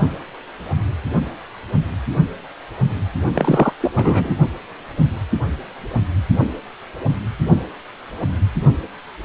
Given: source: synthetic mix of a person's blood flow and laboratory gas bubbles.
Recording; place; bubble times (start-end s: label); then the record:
Doppler ultrasound of blood flow; precordium
3.35-3.73 s: bubbles
3.81-4.36 s: bubbles
From the record:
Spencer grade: 2 (many but less than half of the cardiac periods contain bubble signals, singularly or in groups); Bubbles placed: only in the low amplitude regions of the cardiac cycle